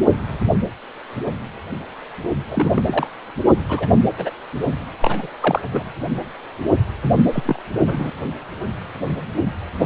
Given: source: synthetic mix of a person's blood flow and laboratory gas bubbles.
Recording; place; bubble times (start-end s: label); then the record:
Doppler ultrasound of blood flow; precordium
2.48-2.82 s: bubbles
2.87-3.07 s: bubbles
3.69-3.88 s: bubbles
4.17-4.30 s: bubbles
5.01-5.29 s: bubbles
5.41-5.62 s: bubbles
5.70-5.92 s: bubbles
7.33-7.62 s: bubbles
7.87-8.14 s: bubbles
From the record:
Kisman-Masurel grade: 222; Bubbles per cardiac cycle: several, 3 to 8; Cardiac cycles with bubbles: 10 to 50%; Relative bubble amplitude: moderate (0.250 to 0.450); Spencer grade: 2 (many but less than half of the cardiac periods contain bubble signals, singularly or in groups); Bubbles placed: only in the low amplitude regions of the cardiac cycle